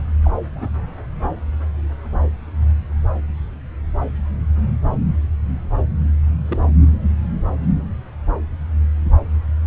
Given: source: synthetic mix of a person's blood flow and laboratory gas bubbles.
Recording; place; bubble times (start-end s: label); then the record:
Doppler ultrasound of blood flow; subclavian vein
0.22-0.31 s: bubbles
0.52-0.68 s: bubbles
6.48-6.73 s: bubbles
From the record:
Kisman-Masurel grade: 111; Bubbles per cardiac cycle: 1 to 2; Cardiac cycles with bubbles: 1 to 10%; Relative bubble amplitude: barely perceptible (0.100 to 0.250); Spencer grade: 1 (occasional bubble signal discernible with the cardiac motion signal, with majority of cardiac periods free of bubbles); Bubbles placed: anywhere in the cardiac cycle